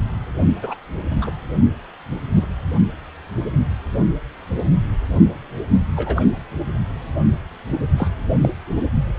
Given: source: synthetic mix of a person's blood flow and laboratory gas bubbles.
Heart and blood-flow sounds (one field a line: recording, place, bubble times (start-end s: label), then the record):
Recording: Doppler ultrasound of blood flow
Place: precordium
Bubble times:
0.62-0.74 s: bubbles
1.21-1.31 s: bubbles
2.35-2.47 s: bubbles
5.96-6.25 s: bubbles
7.97-8.09 s: bubbles
8.41-8.50 s: bubbles
From the record:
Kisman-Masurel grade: 122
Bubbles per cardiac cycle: 1 to 2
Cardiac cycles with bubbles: 10 to 50%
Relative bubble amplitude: moderate (0.250 to 0.450)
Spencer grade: 2 (many but less than half of the cardiac periods contain bubble signals, singularly or in groups)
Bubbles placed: only in the low amplitude regions of the cardiac cycle